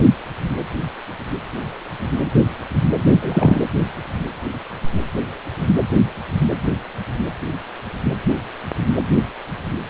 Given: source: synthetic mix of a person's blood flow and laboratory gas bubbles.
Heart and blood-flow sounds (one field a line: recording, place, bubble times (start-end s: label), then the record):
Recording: Doppler ultrasound of blood flow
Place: precordium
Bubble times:
3.06-3.15 s: bubbles
3.21-3.66 s: bubbles
From the record:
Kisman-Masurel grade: 213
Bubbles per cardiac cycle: several, 3 to 8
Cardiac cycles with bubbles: 1 to 10%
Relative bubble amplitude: loud (0.450 to 0.775)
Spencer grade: 1 (occasional bubble signal discernible with the cardiac motion signal, with majority of cardiac periods free of bubbles)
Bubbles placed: anywhere in the cardiac cycle